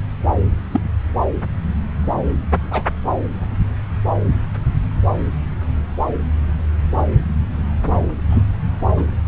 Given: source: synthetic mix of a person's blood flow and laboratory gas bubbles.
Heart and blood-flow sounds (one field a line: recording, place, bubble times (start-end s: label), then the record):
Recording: Doppler ultrasound of blood flow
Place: subclavian vein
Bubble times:
0.72-0.80 s: bubbles
2.71-2.83 s: bubbles
8.29-8.43 s: bubbles
8.95-9.05 s: bubbles
From the record:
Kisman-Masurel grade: 123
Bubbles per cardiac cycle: 1 to 2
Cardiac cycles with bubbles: 10 to 50%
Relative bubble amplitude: loud (0.450 to 0.775)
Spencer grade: 2 (many but less than half of the cardiac periods contain bubble signals, singularly or in groups)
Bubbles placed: anywhere in the cardiac cycle